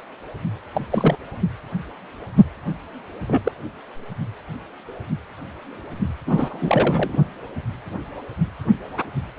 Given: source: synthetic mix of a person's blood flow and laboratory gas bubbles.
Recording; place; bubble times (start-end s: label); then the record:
Doppler ultrasound of blood flow; precordium
0.74-0.85 s: bubbles
0.90-1.17 s: bubbles
3.27-3.52 s: bubbles
6.26-7.17 s: bubbles
From the record:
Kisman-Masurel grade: 222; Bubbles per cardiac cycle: several, 3 to 8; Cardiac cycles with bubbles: 10 to 50%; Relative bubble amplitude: moderate (0.250 to 0.450); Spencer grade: 2 (many but less than half of the cardiac periods contain bubble signals, singularly or in groups); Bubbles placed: only in the low amplitude regions of the cardiac cycle